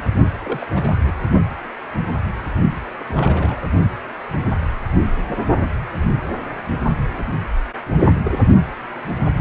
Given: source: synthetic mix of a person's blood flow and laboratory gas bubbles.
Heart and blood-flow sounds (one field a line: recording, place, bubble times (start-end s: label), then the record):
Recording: Doppler ultrasound of blood flow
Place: precordium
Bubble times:
0.43-0.67 s: bubbles
0.75-0.93 s: bubbles
0.98-1.12 s: bubbles
3.00-3.04 s: bubbles
3.07-3.60 s: bubbles
7.17-7.37 s: bubbles
8.23-8.40 s: bubbles
From the record:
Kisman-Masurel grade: 221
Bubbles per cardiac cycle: several, 3 to 8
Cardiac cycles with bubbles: 10 to 50%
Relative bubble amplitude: barely perceptible (0.100 to 0.250)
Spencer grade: 2 (many but less than half of the cardiac periods contain bubble signals, singularly or in groups)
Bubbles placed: only in the low amplitude regions of the cardiac cycle